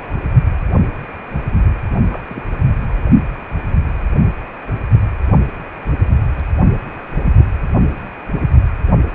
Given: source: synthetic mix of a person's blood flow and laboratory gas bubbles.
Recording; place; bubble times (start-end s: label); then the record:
Doppler ultrasound of blood flow; precordium
1.99-2.43 s: bubbles
From the record:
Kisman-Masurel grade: 111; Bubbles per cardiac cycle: 1 to 2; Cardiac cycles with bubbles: 1 to 10%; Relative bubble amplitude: barely perceptible (0.100 to 0.250); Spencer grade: 1 (occasional bubble signal discernible with the cardiac motion signal, with majority of cardiac periods free of bubbles); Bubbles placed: anywhere in the cardiac cycle